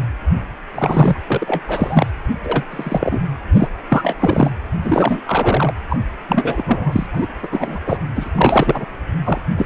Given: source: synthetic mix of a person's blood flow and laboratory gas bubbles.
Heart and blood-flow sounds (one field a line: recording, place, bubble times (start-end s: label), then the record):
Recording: Doppler ultrasound of blood flow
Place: precordium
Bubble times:
0.74-1.17 s: bubbles
1.26-1.61 s: bubbles
1.68-2.11 s: bubbles
2.45-2.64 s: bubbles
2.71-3.20 s: bubbles
3.54-3.68 s: bubbles
3.88-4.16 s: bubbles
4.20-4.51 s: bubbles
4.82-5.20 s: bubbles
5.25-5.74 s: bubbles
5.89-5.96 s: bubbles
6.28-7.07 s: bubbles
7.12-7.27 s: bubbles
7.42-7.49 s: bubbles
7.51-7.79 s: bubbles
7.86-7.97 s: bubbles
8.15-8.29 s: bubbles
8.35-8.85 s: bubbles
9.23-9.41 s: bubbles
9.55-9.65 s: bubbles
From the record:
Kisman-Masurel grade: 343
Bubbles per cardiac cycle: rolling drumbeat, 9 or more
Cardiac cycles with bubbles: 100%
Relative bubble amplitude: loud (0.450 to 0.775)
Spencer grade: 3 (all of the cardiac periods contain showers or single bubble signals, but not dominating or overriding the cardiac motion signals)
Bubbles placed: anywhere in the cardiac cycle